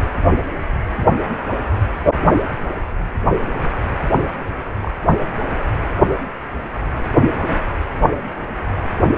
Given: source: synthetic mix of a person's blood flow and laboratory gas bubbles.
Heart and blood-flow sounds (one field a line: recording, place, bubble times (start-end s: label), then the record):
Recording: Doppler ultrasound of blood flow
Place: precordium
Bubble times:
4.81-4.91 s: bubbles
From the record:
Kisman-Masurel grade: 111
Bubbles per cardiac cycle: 1 to 2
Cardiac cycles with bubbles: 1 to 10%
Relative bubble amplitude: barely perceptible (0.100 to 0.250)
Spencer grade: 1 (occasional bubble signal discernible with the cardiac motion signal, with majority of cardiac periods free of bubbles)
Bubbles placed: anywhere in the cardiac cycle